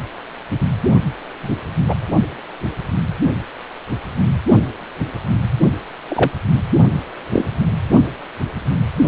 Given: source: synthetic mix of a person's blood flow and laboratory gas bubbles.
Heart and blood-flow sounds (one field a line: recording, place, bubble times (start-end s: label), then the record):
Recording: Doppler ultrasound of blood flow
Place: precordium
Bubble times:
1.43-1.57 s: bubbles
1.88-1.95 s: bubbles
6.08-6.31 s: bubbles
7.33-7.47 s: bubbles
From the record:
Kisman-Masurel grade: 123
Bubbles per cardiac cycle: 1 to 2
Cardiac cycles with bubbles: 10 to 50%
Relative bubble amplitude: loud (0.450 to 0.775)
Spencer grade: 2 (many but less than half of the cardiac periods contain bubble signals, singularly or in groups)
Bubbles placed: only in the low amplitude regions of the cardiac cycle